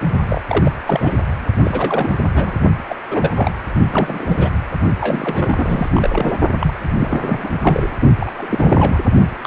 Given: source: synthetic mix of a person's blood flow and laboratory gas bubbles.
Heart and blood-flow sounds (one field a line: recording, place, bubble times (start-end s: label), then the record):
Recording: Doppler ultrasound of blood flow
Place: precordium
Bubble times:
0.28-0.41 s: bubbles
0.49-0.72 s: bubbles
0.86-1.14 s: bubbles
1.64-2.17 s: bubbles
2.34-2.53 s: bubbles
2.89-2.95 s: bubbles
3.10-3.51 s: bubbles
3.85-4.50 s: bubbles
5.00-5.89 s: bubbles
5.94-6.38 s: bubbles
6.58-6.79 s: bubbles
7.00-7.49 s: bubbles
7.62-7.87 s: bubbles
8.20-8.32 s: bubbles
8.38-8.98 s: bubbles
9.44-9.46 s: bubbles
From the record:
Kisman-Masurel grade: 342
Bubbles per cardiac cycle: rolling drumbeat, 9 or more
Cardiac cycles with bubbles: 100%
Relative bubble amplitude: moderate (0.250 to 0.450)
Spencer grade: 3 (all of the cardiac periods contain showers or single bubble signals, but not dominating or overriding the cardiac motion signals)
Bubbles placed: only in the low amplitude regions of the cardiac cycle